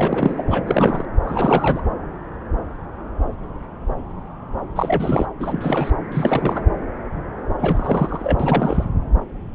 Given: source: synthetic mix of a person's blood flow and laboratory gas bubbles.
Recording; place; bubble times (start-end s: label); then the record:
Doppler ultrasound of blood flow; subclavian vein
0.00-0.42 s: bubbles
0.47-1.05 s: bubbles
1.24-1.81 s: bubbles
4.76-5.26 s: bubbles
5.40-5.91 s: bubbles
6.12-6.68 s: bubbles
7.60-8.84 s: bubbles
From the record:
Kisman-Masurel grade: 332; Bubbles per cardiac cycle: rolling drumbeat, 9 or more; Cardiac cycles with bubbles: 50 to 99%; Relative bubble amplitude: moderate (0.250 to 0.450); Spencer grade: 3 (all of the cardiac periods contain showers or single bubble signals, but not dominating or overriding the cardiac motion signals); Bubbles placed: anywhere in the cardiac cycle